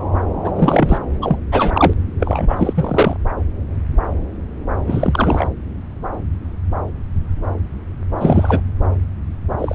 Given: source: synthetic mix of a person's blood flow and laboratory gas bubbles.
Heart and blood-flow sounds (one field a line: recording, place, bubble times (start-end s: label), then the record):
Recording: Doppler ultrasound of blood flow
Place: subclavian vein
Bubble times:
0.43-0.53 s: bubbles
0.55-0.98 s: bubbles
1.21-1.36 s: bubbles
1.51-1.94 s: bubbles
2.19-3.17 s: bubbles
4.87-5.47 s: bubbles
8.18-8.60 s: bubbles
9.58-9.74 s: bubbles
From the record:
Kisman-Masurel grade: 333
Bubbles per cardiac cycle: rolling drumbeat, 9 or more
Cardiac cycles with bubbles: 50 to 99%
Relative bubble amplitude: loud (0.450 to 0.775)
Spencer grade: 3 (all of the cardiac periods contain showers or single bubble signals, but not dominating or overriding the cardiac motion signals)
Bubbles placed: anywhere in the cardiac cycle